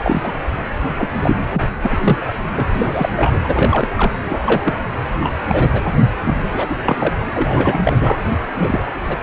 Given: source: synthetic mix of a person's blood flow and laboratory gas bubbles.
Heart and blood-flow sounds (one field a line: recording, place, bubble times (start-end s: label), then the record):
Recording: Doppler ultrasound of blood flow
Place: precordium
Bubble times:
0.03-0.34 s: bubbles
0.98-1.10 s: bubbles
1.23-1.36 s: bubbles
1.50-1.62 s: bubbles
1.83-1.96 s: bubbles
2.00-2.17 s: bubbles
2.54-2.70 s: bubbles
2.74-3.10 s: bubbles
3.15-3.40 s: bubbles
3.43-3.89 s: bubbles
3.95-4.14 s: bubbles
4.24-4.39 s: bubbles
4.45-4.75 s: bubbles
5.20-5.32 s: bubbles
5.48-5.82 s: bubbles
6.23-6.50 s: bubbles
6.53-6.74 s: bubbles
6.82-7.13 s: bubbles
7.34-7.97 s: bubbles
8.00-8.22 s: bubbles
8.58-8.85 s: bubbles
9.09-9.17 s: bubbles
From the record:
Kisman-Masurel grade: 242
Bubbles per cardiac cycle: several, 3 to 8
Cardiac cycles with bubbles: 100%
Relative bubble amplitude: moderate (0.250 to 0.450)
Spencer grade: 3 (all of the cardiac periods contain showers or single bubble signals, but not dominating or overriding the cardiac motion signals)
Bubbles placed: anywhere in the cardiac cycle